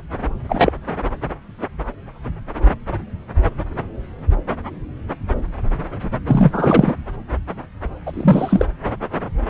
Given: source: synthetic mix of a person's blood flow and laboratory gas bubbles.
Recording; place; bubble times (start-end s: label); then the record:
Doppler ultrasound of blood flow; subclavian vein
0.49-0.72 s: bubbles
6.26-6.93 s: bubbles
8.06-8.66 s: bubbles
From the record:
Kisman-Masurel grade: 223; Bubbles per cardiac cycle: several, 3 to 8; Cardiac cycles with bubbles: 10 to 50%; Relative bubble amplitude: loud (0.450 to 0.775); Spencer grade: 2 (many but less than half of the cardiac periods contain bubble signals, singularly or in groups); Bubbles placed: anywhere in the cardiac cycle